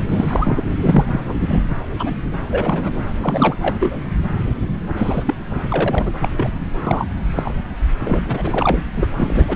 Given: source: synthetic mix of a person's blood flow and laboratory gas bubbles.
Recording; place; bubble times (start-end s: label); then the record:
Doppler ultrasound of blood flow; subclavian vein
0.00-0.02 s: bubbles
0.08-0.64 s: bubbles
0.81-1.06 s: bubbles
1.11-1.20 s: bubbles
1.24-1.33 s: bubbles
1.42-1.64 s: bubbles
1.96-2.15 s: bubbles
2.50-3.00 s: bubbles
3.21-3.54 s: bubbles
3.62-3.75 s: bubbles
3.80-4.09 s: bubbles
4.97-5.23 s: bubbles
5.26-5.34 s: bubbles
5.69-6.10 s: bubbles
6.21-6.29 s: bubbles
6.31-6.49 s: bubbles
6.87-7.08 s: bubbles
7.35-7.54 s: bubbles
8.00-8.21 s: bubbles
8.26-8.83 s: bubbles
8.96-9.07 s: bubbles
9.16-9.56 s: bubbles
From the record:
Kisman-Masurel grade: 243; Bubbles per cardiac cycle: several, 3 to 8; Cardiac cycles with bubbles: 100%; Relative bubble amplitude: loud (0.450 to 0.775); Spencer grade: 3 (all of the cardiac periods contain showers or single bubble signals, but not dominating or overriding the cardiac motion signals); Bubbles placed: anywhere in the cardiac cycle